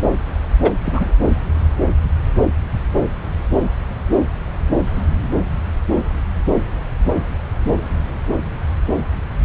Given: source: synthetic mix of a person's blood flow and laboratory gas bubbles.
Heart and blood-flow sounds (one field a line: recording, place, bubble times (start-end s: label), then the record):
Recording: Doppler ultrasound of blood flow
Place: subclavian vein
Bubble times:
0.60-0.71 s: bubbles
0.85-1.11 s: bubbles
From the record:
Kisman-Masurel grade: 212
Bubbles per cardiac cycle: several, 3 to 8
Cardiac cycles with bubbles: 1 to 10%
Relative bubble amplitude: moderate (0.250 to 0.450)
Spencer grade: 1 (occasional bubble signal discernible with the cardiac motion signal, with majority of cardiac periods free of bubbles)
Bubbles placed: anywhere in the cardiac cycle